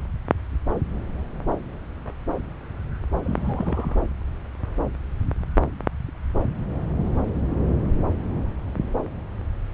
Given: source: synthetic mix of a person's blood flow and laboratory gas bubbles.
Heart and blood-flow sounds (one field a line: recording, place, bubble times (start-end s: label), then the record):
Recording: Doppler ultrasound of blood flow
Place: subclavian vein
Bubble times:
3.24-3.96 s: bubbles
From the record:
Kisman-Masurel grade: 211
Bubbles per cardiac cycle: several, 3 to 8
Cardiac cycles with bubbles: 1 to 10%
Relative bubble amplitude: barely perceptible (0.100 to 0.250)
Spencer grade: 1 (occasional bubble signal discernible with the cardiac motion signal, with majority of cardiac periods free of bubbles)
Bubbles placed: anywhere in the cardiac cycle